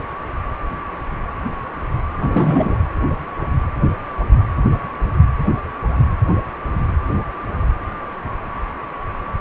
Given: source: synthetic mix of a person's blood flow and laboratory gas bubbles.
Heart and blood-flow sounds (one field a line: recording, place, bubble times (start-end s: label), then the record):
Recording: Doppler ultrasound of blood flow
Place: precordium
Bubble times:
2.17-2.79 s: bubbles
From the record:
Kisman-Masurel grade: 212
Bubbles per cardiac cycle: several, 3 to 8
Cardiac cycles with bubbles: 1 to 10%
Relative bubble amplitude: moderate (0.250 to 0.450)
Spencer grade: 1 (occasional bubble signal discernible with the cardiac motion signal, with majority of cardiac periods free of bubbles)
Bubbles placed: anywhere in the cardiac cycle